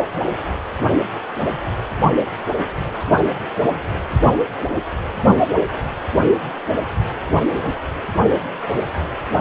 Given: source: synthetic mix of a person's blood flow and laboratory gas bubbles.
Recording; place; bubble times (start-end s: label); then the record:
Doppler ultrasound of blood flow; precordium
8.67-8.79 s: bubbles
From the record:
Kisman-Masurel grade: 111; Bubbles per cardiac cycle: 1 to 2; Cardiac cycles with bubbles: 1 to 10%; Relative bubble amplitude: barely perceptible (0.100 to 0.250); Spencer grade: 1 (occasional bubble signal discernible with the cardiac motion signal, with majority of cardiac periods free of bubbles); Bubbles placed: only in the low amplitude regions of the cardiac cycle